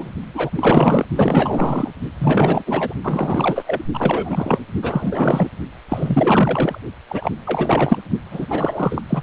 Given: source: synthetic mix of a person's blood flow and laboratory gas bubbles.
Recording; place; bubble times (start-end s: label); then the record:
Doppler ultrasound of blood flow; precordium
0.00-0.11 s: bubbles
0.34-1.05 s: bubbles
1.16-1.91 s: bubbles
2.18-2.94 s: bubbles
3.02-3.83 s: bubbles
3.93-4.63 s: bubbles
4.81-5.49 s: bubbles
5.88-6.79 s: bubbles
7.08-7.30 s: bubbles
7.45-8.01 s: bubbles
8.31-8.46 s: bubbles
8.49-9.02 s: bubbles
9.09-9.23 s: bubbles
From the record:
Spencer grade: 4 (maximum detectable bubble signal sounding continuously throughout systole and diastole of every cardiac period, and overriding the amplitude of the normal cardiac signals); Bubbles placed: only in the low amplitude regions of the cardiac cycle